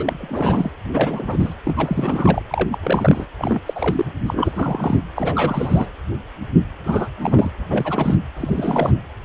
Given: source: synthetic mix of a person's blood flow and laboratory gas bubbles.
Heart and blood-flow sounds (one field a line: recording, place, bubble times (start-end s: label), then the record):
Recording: Doppler ultrasound of blood flow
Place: precordium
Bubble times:
0.00-0.71 s: bubbles
0.93-1.54 s: bubbles
1.65-2.43 s: bubbles
2.50-2.69 s: bubbles
2.72-2.78 s: bubbles
2.83-3.26 s: bubbles
3.38-3.61 s: bubbles
3.66-4.05 s: bubbles
4.26-5.00 s: bubbles
5.16-5.89 s: bubbles
6.84-7.09 s: bubbles
7.21-7.50 s: bubbles
7.70-8.15 s: bubbles
8.37-8.94 s: bubbles
From the record:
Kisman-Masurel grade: 332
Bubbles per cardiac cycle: rolling drumbeat, 9 or more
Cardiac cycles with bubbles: 50 to 99%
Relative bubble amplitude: moderate (0.250 to 0.450)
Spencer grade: 3 (all of the cardiac periods contain showers or single bubble signals, but not dominating or overriding the cardiac motion signals)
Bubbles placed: anywhere in the cardiac cycle